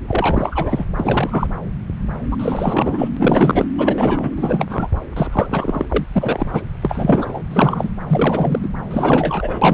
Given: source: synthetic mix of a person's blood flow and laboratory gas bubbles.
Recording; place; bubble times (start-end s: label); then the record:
Doppler ultrasound of blood flow; subclavian vein
0.08-0.84 s: bubbles
0.99-1.48 s: bubbles
2.31-3.08 s: bubbles
3.17-3.65 s: bubbles
3.75-4.30 s: bubbles
4.37-4.88 s: bubbles
5.16-5.27 s: bubbles
5.31-5.85 s: bubbles
5.89-6.05 s: bubbles
6.12-6.62 s: bubbles
6.81-7.43 s: bubbles
7.50-7.90 s: bubbles
8.07-8.59 s: bubbles
8.62-8.69 s: bubbles
8.90-9.73 s: bubbles
From the record:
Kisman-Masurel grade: 333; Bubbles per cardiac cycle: rolling drumbeat, 9 or more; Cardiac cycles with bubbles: 50 to 99%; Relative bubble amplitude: loud (0.450 to 0.775); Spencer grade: 3 (all of the cardiac periods contain showers or single bubble signals, but not dominating or overriding the cardiac motion signals); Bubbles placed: anywhere in the cardiac cycle